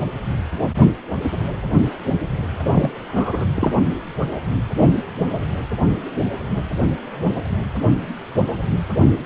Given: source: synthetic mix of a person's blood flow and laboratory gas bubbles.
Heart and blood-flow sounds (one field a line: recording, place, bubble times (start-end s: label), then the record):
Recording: Doppler ultrasound of blood flow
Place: precordium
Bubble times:
2.62-2.95 s: bubbles
3.15-3.45 s: bubbles
3.54-3.71 s: bubbles
From the record:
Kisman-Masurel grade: 223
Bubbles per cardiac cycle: several, 3 to 8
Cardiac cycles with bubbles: 10 to 50%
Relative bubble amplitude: loud (0.450 to 0.775)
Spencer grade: 2 (many but less than half of the cardiac periods contain bubble signals, singularly or in groups)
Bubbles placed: only in the low amplitude regions of the cardiac cycle